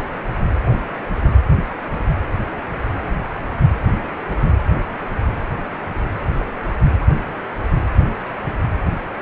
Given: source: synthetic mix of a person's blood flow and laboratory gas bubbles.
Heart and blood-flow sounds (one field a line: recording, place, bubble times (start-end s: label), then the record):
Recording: Doppler ultrasound of blood flow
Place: precordium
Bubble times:
4.02-4.08 s: bubbles
4.29-4.36 s: bubbles
6.38-6.46 s: bubbles
From the record:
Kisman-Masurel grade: 121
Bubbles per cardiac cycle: 1 to 2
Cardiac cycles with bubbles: 10 to 50%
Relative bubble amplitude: barely perceptible (0.100 to 0.250)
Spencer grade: 2 (many but less than half of the cardiac periods contain bubble signals, singularly or in groups)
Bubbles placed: anywhere in the cardiac cycle